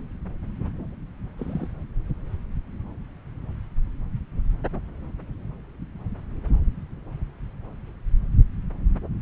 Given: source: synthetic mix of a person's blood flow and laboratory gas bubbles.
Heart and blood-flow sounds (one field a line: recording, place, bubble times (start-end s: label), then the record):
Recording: Doppler ultrasound of blood flow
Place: subclavian vein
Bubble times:
1.38-1.67 s: bubbles
From the record:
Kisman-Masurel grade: 111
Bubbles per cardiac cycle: 1 to 2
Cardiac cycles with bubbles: 1 to 10%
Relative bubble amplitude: barely perceptible (0.100 to 0.250)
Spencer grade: 1 (occasional bubble signal discernible with the cardiac motion signal, with majority of cardiac periods free of bubbles)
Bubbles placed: anywhere in the cardiac cycle